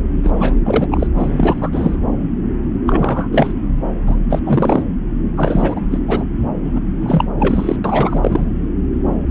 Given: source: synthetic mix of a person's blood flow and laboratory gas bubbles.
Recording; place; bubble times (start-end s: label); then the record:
Doppler ultrasound of blood flow; subclavian vein
0.23-0.31 s: bubbles
0.38-0.54 s: bubbles
0.65-0.87 s: bubbles
0.91-1.07 s: bubbles
1.16-1.70 s: bubbles
1.72-1.96 s: bubbles
2.86-3.29 s: bubbles
3.32-3.54 s: bubbles
4.06-4.16 s: bubbles
4.29-4.40 s: bubbles
4.46-4.85 s: bubbles
5.36-5.80 s: bubbles
5.90-5.98 s: bubbles
6.07-6.24 s: bubbles
6.64-6.80 s: bubbles
7.00-7.24 s: bubbles
7.39-7.80 s: bubbles
7.84-8.52 s: bubbles
From the record:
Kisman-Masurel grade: 333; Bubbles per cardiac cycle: rolling drumbeat, 9 or more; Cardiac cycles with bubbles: 50 to 99%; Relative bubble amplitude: loud (0.450 to 0.775); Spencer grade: 3 (all of the cardiac periods contain showers or single bubble signals, but not dominating or overriding the cardiac motion signals); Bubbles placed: anywhere in the cardiac cycle